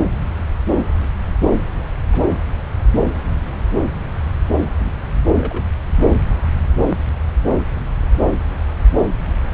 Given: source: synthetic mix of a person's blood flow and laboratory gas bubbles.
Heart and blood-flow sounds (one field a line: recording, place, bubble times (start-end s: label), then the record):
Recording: Doppler ultrasound of blood flow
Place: subclavian vein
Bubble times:
1.60-1.66 s: bubbles
2.12-2.21 s: bubbles
4.79-4.92 s: bubbles
5.37-5.64 s: bubbles
From the record:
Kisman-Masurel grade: 121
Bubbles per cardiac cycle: 1 to 2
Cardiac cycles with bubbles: 10 to 50%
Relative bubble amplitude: barely perceptible (0.100 to 0.250)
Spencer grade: 2 (many but less than half of the cardiac periods contain bubble signals, singularly or in groups)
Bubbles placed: anywhere in the cardiac cycle